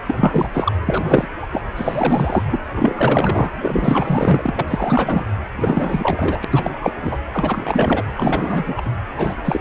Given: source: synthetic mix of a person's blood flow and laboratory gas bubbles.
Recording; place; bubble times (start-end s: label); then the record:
Doppler ultrasound of blood flow; precordium
0.06-0.48 s: bubbles
0.53-0.72 s: bubbles
0.85-1.27 s: bubbles
1.42-1.47 s: bubbles
1.52-1.61 s: bubbles
1.76-2.44 s: bubbles
2.46-2.62 s: bubbles
2.75-3.51 s: bubbles
3.61-4.52 s: bubbles
4.55-5.25 s: bubbles
5.56-6.44 s: bubbles
6.50-6.71 s: bubbles
6.81-6.93 s: bubbles
7.02-7.17 s: bubbles
7.32-8.04 s: bubbles
8.15-8.91 s: bubbles
9.17-9.35 s: bubbles
9.45-9.61 s: bubbles
From the record:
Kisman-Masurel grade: 444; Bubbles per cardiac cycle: continuous sound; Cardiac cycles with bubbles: 100%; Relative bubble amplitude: maximal (0.775 to 0.999); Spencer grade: 4 (maximum detectable bubble signal sounding continuously throughout systole and diastole of every cardiac period, and overriding the amplitude of the normal cardiac signals); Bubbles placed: anywhere in the cardiac cycle